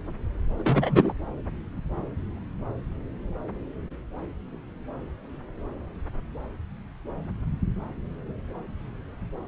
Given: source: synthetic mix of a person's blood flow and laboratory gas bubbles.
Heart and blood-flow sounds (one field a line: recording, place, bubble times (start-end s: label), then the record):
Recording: Doppler ultrasound of blood flow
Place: subclavian vein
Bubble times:
0.57-1.13 s: bubbles
From the record:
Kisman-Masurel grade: 112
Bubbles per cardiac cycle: 1 to 2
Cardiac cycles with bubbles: 1 to 10%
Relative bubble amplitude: moderate (0.250 to 0.450)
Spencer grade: 1 (occasional bubble signal discernible with the cardiac motion signal, with majority of cardiac periods free of bubbles)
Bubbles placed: anywhere in the cardiac cycle